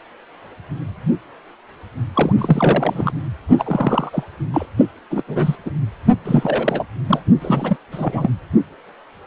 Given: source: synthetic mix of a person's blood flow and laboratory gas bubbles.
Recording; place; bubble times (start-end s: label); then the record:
Doppler ultrasound of blood flow; precordium
2.14-2.33 s: bubbles
2.38-3.11 s: bubbles
3.49-4.10 s: bubbles
4.12-4.24 s: bubbles
4.54-4.66 s: bubbles
4.78-4.86 s: bubbles
5.11-5.23 s: bubbles
5.28-5.56 s: bubbles
5.66-5.71 s: bubbles
6.25-6.83 s: bubbles
7.08-7.21 s: bubbles
7.41-7.76 s: bubbles
7.92-8.30 s: bubbles
From the record:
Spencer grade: 3 (all of the cardiac periods contain showers or single bubble signals, but not dominating or overriding the cardiac motion signals); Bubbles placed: anywhere in the cardiac cycle